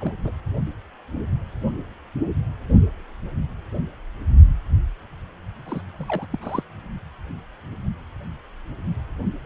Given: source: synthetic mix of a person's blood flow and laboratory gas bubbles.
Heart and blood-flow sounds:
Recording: Doppler ultrasound of blood flow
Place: precordium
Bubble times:
0.01-0.12 s: bubbles
0.24-0.32 s: bubbles
5.65-5.81 s: bubbles
5.98-6.27 s: bubbles
6.31-6.63 s: bubbles
From the record:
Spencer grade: 2 (many but less than half of the cardiac periods contain bubble signals, singularly or in groups)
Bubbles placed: only in the low amplitude regions of the cardiac cycle

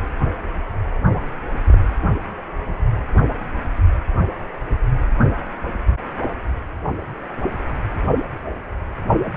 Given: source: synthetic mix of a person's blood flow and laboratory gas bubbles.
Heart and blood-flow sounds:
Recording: Doppler ultrasound of blood flow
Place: precordium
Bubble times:
1.15-1.20 s: bubbles
1.68-1.80 s: bubbles
From the record:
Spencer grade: 1 (occasional bubble signal discernible with the cardiac motion signal, with majority of cardiac periods free of bubbles)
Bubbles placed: anywhere in the cardiac cycle

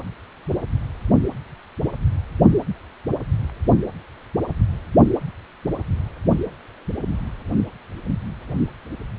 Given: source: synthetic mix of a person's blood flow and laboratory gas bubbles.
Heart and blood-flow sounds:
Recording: Doppler ultrasound of blood flow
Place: precordium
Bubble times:
no bubbles
From the record:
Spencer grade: 0 (complete lack of bubble signals)

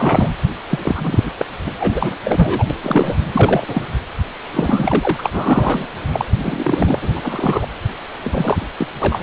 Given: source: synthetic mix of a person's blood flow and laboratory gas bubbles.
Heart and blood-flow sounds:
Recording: Doppler ultrasound of blood flow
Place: precordium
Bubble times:
0.00-0.30 s: bubbles
0.70-0.79 s: bubbles
0.83-1.31 s: bubbles
1.39-1.46 s: bubbles
1.66-1.73 s: bubbles
1.79-2.17 s: bubbles
2.23-2.67 s: bubbles
2.70-2.75 s: bubbles
2.83-3.17 s: bubbles
3.33-3.84 s: bubbles
4.53-5.87 s: bubbles
6.12-6.99 s: bubbles
7.02-7.11 s: bubbles
7.15-7.66 s: bubbles
8.21-8.67 s: bubbles
8.77-8.87 s: bubbles
8.99-9.20 s: bubbles
From the record:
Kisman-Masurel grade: 343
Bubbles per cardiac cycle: rolling drumbeat, 9 or more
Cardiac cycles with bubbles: 100%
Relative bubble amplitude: loud (0.450 to 0.775)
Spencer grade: 3 (all of the cardiac periods contain showers or single bubble signals, but not dominating or overriding the cardiac motion signals)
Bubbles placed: anywhere in the cardiac cycle

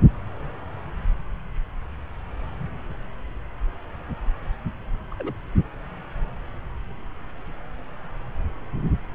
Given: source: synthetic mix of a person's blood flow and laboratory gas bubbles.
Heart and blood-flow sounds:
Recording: Doppler ultrasound of blood flow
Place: subclavian vein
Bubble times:
5.11-5.14 s: bubbles
5.19-5.33 s: bubbles
From the record:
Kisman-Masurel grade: 111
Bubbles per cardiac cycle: 1 to 2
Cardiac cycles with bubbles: 1 to 10%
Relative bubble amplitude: barely perceptible (0.100 to 0.250)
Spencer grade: 1 (occasional bubble signal discernible with the cardiac motion signal, with majority of cardiac periods free of bubbles)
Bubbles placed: anywhere in the cardiac cycle

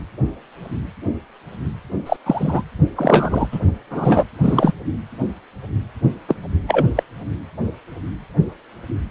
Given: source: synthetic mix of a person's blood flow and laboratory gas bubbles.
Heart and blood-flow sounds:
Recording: Doppler ultrasound of blood flow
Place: precordium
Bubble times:
2.06-2.17 s: bubbles
2.25-2.62 s: bubbles
2.96-3.48 s: bubbles
3.52-3.59 s: bubbles
3.90-4.25 s: bubbles
4.42-4.73 s: bubbles
6.28-6.35 s: bubbles
6.67-6.84 s: bubbles
6.95-7.03 s: bubbles
From the record:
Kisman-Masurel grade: 223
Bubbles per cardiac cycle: several, 3 to 8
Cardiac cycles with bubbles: 10 to 50%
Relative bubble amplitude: loud (0.450 to 0.775)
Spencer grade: 2 (many but less than half of the cardiac periods contain bubble signals, singularly or in groups)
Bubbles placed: only in the low amplitude regions of the cardiac cycle

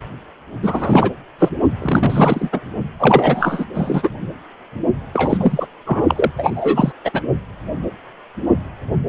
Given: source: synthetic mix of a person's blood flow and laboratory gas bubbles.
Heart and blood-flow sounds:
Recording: Doppler ultrasound of blood flow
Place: precordium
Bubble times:
0.62-1.10 s: bubbles
1.39-1.49 s: bubbles
1.79-2.50 s: bubbles
2.52-2.61 s: bubbles
2.99-3.65 s: bubbles
3.74-4.09 s: bubbles
5.13-5.67 s: bubbles
5.86-6.04 s: bubbles
6.08-6.31 s: bubbles
6.37-6.92 s: bubbles
7.04-7.22 s: bubbles
From the record:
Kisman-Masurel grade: 333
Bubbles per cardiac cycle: rolling drumbeat, 9 or more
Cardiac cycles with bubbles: 50 to 99%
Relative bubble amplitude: loud (0.450 to 0.775)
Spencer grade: 3 (all of the cardiac periods contain showers or single bubble signals, but not dominating or overriding the cardiac motion signals)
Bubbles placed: only in the low amplitude regions of the cardiac cycle

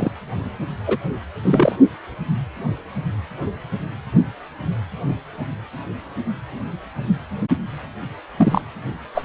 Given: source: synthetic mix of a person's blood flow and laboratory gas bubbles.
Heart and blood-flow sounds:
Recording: Doppler ultrasound of blood flow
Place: precordium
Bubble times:
0.00-0.12 s: bubbles
0.86-0.99 s: bubbles
1.44-1.75 s: bubbles
8.38-8.62 s: bubbles
9.14-9.25 s: bubbles
From the record:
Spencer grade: 3 (all of the cardiac periods contain showers or single bubble signals, but not dominating or overriding the cardiac motion signals)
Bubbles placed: only in the low amplitude regions of the cardiac cycle

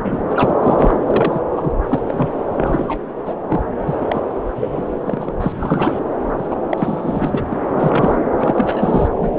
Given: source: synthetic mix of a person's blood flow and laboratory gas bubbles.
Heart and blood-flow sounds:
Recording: Doppler ultrasound of blood flow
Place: subclavian vein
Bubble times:
0.00-0.54 s: bubbles
0.62-0.94 s: bubbles
1.06-1.40 s: bubbles
1.52-1.72 s: bubbles
1.88-2.02 s: bubbles
2.07-2.28 s: bubbles
2.57-2.99 s: bubbles
3.25-3.34 s: bubbles
3.49-3.64 s: bubbles
3.85-4.06 s: bubbles
4.08-4.21 s: bubbles
4.55-5.33 s: bubbles
5.40-6.00 s: bubbles
6.38-6.57 s: bubbles
6.71-7.44 s: bubbles
7.50-7.58 s: bubbles
7.76-8.20 s: bubbles
8.38-9.08 s: bubbles
9.16-9.39 s: bubbles
From the record:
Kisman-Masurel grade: 342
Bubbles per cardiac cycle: rolling drumbeat, 9 or more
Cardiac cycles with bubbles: 100%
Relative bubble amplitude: moderate (0.250 to 0.450)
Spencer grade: 3 (all of the cardiac periods contain showers or single bubble signals, but not dominating or overriding the cardiac motion signals)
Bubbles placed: anywhere in the cardiac cycle

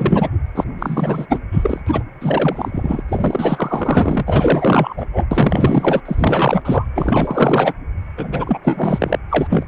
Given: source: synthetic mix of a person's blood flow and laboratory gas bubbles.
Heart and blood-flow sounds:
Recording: Doppler ultrasound of blood flow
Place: precordium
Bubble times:
0.00-0.30 s: bubbles
0.55-0.64 s: bubbles
0.78-1.40 s: bubbles
1.51-1.80 s: bubbles
1.86-2.03 s: bubbles
2.21-3.03 s: bubbles
3.08-4.23 s: bubbles
4.27-4.95 s: bubbles
4.97-5.06 s: bubbles
5.12-5.25 s: bubbles
5.31-6.00 s: bubbles
6.05-6.62 s: bubbles
6.65-6.86 s: bubbles
6.95-7.74 s: bubbles
8.17-8.59 s: bubbles
8.63-9.17 s: bubbles
9.29-9.65 s: bubbles
From the record:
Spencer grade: 4 (maximum detectable bubble signal sounding continuously throughout systole and diastole of every cardiac period, and overriding the amplitude of the normal cardiac signals)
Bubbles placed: anywhere in the cardiac cycle

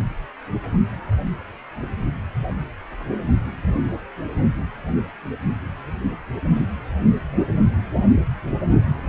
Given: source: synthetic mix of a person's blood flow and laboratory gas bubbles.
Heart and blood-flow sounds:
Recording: Doppler ultrasound of blood flow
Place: precordium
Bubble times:
6.55-6.66 s: bubbles
From the record:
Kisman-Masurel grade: 112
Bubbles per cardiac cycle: 1 to 2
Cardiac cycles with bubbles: 1 to 10%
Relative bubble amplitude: moderate (0.250 to 0.450)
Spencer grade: 1 (occasional bubble signal discernible with the cardiac motion signal, with majority of cardiac periods free of bubbles)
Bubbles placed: anywhere in the cardiac cycle

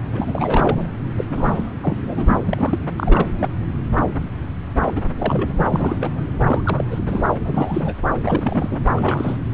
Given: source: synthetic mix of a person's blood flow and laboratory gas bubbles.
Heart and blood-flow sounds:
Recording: Doppler ultrasound of blood flow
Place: subclavian vein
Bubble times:
0.14-0.87 s: bubbles
1.15-1.25 s: bubbles
1.29-1.70 s: bubbles
1.83-2.41 s: bubbles
2.47-2.79 s: bubbles
2.97-3.31 s: bubbles
3.40-3.49 s: bubbles
4.82-5.01 s: bubbles
5.18-6.24 s: bubbles
6.46-6.61 s: bubbles
6.64-6.84 s: bubbles
6.90-6.99 s: bubbles
7.06-7.27 s: bubbles
7.30-7.96 s: bubbles
8.21-8.79 s: bubbles
8.96-9.38 s: bubbles
From the record:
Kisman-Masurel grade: 332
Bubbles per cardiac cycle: rolling drumbeat, 9 or more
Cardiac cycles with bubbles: 50 to 99%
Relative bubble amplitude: moderate (0.250 to 0.450)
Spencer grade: 3 (all of the cardiac periods contain showers or single bubble signals, but not dominating or overriding the cardiac motion signals)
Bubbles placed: anywhere in the cardiac cycle

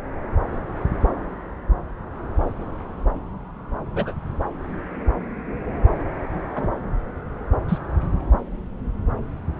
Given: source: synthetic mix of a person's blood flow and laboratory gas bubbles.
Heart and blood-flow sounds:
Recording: Doppler ultrasound of blood flow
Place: subclavian vein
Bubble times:
3.95-4.13 s: bubbles
6.55-6.67 s: bubbles
7.68-7.79 s: bubbles
From the record:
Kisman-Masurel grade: 122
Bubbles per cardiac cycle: 1 to 2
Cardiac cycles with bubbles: 10 to 50%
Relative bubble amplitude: moderate (0.250 to 0.450)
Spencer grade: 2 (many but less than half of the cardiac periods contain bubble signals, singularly or in groups)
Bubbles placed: anywhere in the cardiac cycle

